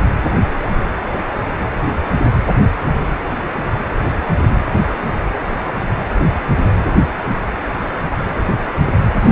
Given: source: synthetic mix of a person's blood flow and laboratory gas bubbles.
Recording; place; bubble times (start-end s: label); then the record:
Doppler ultrasound of blood flow; precordium
9.20-9.32 s: bubbles
From the record:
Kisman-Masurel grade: 212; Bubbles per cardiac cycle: several, 3 to 8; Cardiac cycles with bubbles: 1 to 10%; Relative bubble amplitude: moderate (0.250 to 0.450); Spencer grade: 1 (occasional bubble signal discernible with the cardiac motion signal, with majority of cardiac periods free of bubbles); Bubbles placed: anywhere in the cardiac cycle